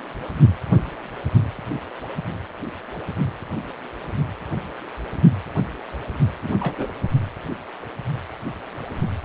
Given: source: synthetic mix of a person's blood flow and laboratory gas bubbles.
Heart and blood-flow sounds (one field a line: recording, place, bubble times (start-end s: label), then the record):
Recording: Doppler ultrasound of blood flow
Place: precordium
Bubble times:
6.43-6.54 s: bubbles
6.59-6.75 s: bubbles
6.78-6.88 s: bubbles
From the record:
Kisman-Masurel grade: 211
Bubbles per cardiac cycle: several, 3 to 8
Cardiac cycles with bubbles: 1 to 10%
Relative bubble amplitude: barely perceptible (0.100 to 0.250)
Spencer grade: 1 (occasional bubble signal discernible with the cardiac motion signal, with majority of cardiac periods free of bubbles)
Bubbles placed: only in the low amplitude regions of the cardiac cycle